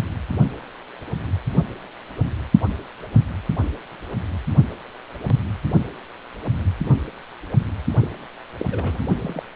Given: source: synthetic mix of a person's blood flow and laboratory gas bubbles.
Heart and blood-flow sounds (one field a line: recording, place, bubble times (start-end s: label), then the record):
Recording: Doppler ultrasound of blood flow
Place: precordium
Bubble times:
8.02-8.08 s: bubbles
8.59-8.65 s: bubbles
8.71-9.06 s: bubbles
9.22-9.43 s: bubbles
From the record:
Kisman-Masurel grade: 221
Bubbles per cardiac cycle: several, 3 to 8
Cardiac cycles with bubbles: 10 to 50%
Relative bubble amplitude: barely perceptible (0.100 to 0.250)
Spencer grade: 2 (many but less than half of the cardiac periods contain bubble signals, singularly or in groups)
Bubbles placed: anywhere in the cardiac cycle